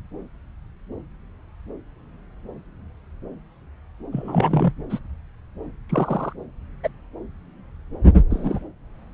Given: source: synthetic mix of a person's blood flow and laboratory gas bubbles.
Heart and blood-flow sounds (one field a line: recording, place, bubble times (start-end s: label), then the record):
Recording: Doppler ultrasound of blood flow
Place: subclavian vein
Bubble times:
4.12-4.72 s: bubbles
4.90-4.99 s: bubbles
5.89-6.33 s: bubbles
6.83-6.88 s: bubbles
8.30-8.60 s: bubbles
From the record:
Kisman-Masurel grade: 122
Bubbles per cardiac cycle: 1 to 2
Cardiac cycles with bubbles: 10 to 50%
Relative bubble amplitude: moderate (0.250 to 0.450)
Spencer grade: 2 (many but less than half of the cardiac periods contain bubble signals, singularly or in groups)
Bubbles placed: anywhere in the cardiac cycle